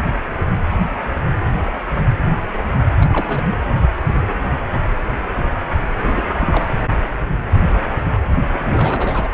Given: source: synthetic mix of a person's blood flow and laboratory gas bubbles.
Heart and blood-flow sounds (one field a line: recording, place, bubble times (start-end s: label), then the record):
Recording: Doppler ultrasound of blood flow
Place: precordium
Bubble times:
3.00-3.42 s: bubbles
6.06-6.21 s: bubbles
6.39-6.65 s: bubbles
8.53-9.29 s: bubbles
From the record:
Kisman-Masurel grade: 222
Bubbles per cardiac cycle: several, 3 to 8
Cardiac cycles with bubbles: 10 to 50%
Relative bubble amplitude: moderate (0.250 to 0.450)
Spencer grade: 2 (many but less than half of the cardiac periods contain bubble signals, singularly or in groups)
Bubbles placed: anywhere in the cardiac cycle